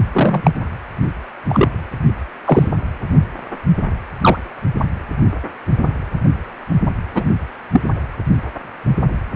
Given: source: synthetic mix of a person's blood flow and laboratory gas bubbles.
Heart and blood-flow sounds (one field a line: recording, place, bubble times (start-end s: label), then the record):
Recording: Doppler ultrasound of blood flow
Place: precordium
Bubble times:
0.12-0.51 s: bubbles
1.48-1.68 s: bubbles
2.44-2.69 s: bubbles
4.21-4.38 s: bubbles
7.15-7.29 s: bubbles
7.73-7.81 s: bubbles
From the record:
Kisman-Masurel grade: 123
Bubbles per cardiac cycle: 1 to 2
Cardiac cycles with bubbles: 10 to 50%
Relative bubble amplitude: loud (0.450 to 0.775)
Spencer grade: 2 (many but less than half of the cardiac periods contain bubble signals, singularly or in groups)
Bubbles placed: anywhere in the cardiac cycle